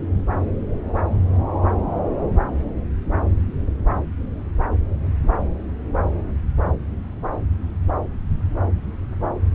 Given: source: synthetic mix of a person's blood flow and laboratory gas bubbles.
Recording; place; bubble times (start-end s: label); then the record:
Doppler ultrasound of blood flow; subclavian vein
no bubbles
From the record:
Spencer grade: 0 (complete lack of bubble signals)